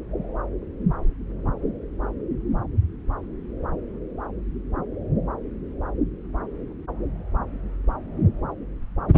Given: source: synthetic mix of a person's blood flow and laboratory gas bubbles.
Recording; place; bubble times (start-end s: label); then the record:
Doppler ultrasound of blood flow; subclavian vein
no bubbles
From the record:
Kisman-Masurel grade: 000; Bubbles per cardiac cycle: 0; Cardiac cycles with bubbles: 0%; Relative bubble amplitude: no bubbles discernible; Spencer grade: 0 (complete lack of bubble signals)